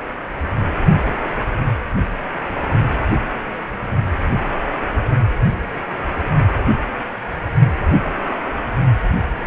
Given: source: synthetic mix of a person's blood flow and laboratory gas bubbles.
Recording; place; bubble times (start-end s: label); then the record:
Doppler ultrasound of blood flow; precordium
no bubbles
From the record:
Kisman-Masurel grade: 000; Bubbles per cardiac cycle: 0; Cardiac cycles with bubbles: 0%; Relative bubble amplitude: no bubbles discernible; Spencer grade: 0 (complete lack of bubble signals)